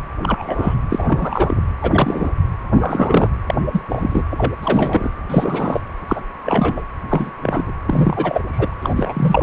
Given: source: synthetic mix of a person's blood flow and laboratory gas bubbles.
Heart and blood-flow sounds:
Doppler ultrasound of blood flow; precordium
0.22-0.74 s: bubbles
0.90-1.62 s: bubbles
1.81-2.30 s: bubbles
2.72-3.29 s: bubbles
3.46-3.54 s: bubbles
3.72-3.82 s: bubbles
3.89-4.23 s: bubbles
4.32-4.51 s: bubbles
4.62-5.10 s: bubbles
5.29-5.80 s: bubbles
6.08-6.21 s: bubbles
6.43-6.82 s: bubbles
7.09-7.32 s: bubbles
7.42-7.72 s: bubbles
7.87-8.42 s: bubbles
8.52-8.76 s: bubbles
8.82-8.94 s: bubbles
8.97-9.43 s: bubbles
From the record:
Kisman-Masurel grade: 243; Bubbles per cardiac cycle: several, 3 to 8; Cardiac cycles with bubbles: 100%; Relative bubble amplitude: loud (0.450 to 0.775); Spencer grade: 3 (all of the cardiac periods contain showers or single bubble signals, but not dominating or overriding the cardiac motion signals); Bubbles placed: anywhere in the cardiac cycle

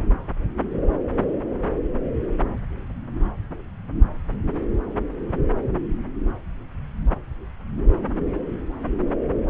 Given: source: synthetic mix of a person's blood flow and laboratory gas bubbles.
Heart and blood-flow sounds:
Doppler ultrasound of blood flow; subclavian vein
no bubbles
From the record:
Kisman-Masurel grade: 000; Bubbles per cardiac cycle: 0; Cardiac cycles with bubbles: 0%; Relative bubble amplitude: no bubbles discernible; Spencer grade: 0 (complete lack of bubble signals)

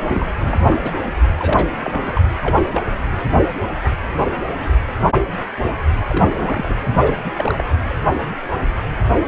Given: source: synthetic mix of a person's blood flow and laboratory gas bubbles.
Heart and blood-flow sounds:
Doppler ultrasound of blood flow; precordium
0.00-0.33 s: bubbles
0.42-0.99 s: bubbles
1.03-1.11 s: bubbles
1.38-1.69 s: bubbles
1.81-2.23 s: bubbles
2.42-2.62 s: bubbles
2.71-2.83 s: bubbles
6.07-6.75 s: bubbles
6.90-7.15 s: bubbles
7.22-7.33 s: bubbles
7.37-7.64 s: bubbles
From the record:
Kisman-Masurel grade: 232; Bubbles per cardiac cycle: several, 3 to 8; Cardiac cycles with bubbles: 50 to 99%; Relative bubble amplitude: moderate (0.250 to 0.450); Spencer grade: 3 (all of the cardiac periods contain showers or single bubble signals, but not dominating or overriding the cardiac motion signals); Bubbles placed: anywhere in the cardiac cycle

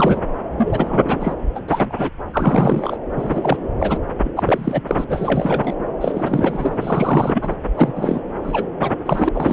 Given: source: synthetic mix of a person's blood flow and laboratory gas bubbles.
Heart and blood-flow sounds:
Doppler ultrasound of blood flow; subclavian vein
0.00-0.21 s: bubbles
0.56-1.36 s: bubbles
1.55-1.60 s: bubbles
1.68-2.09 s: bubbles
2.32-2.98 s: bubbles
3.17-3.57 s: bubbles
3.80-3.98 s: bubbles
4.24-4.31 s: bubbles
4.36-4.43 s: bubbles
4.47-4.81 s: bubbles
4.87-5.05 s: bubbles
5.08-5.74 s: bubbles
6.01-6.77 s: bubbles
6.81-7.56 s: bubbles
7.76-8.20 s: bubbles
8.43-8.66 s: bubbles
8.81-8.92 s: bubbles
9.05-9.29 s: bubbles
9.34-9.53 s: bubbles
From the record:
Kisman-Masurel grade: 342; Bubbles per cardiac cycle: rolling drumbeat, 9 or more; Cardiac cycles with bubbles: 100%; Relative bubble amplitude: moderate (0.250 to 0.450); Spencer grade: 3 (all of the cardiac periods contain showers or single bubble signals, but not dominating or overriding the cardiac motion signals); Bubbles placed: anywhere in the cardiac cycle

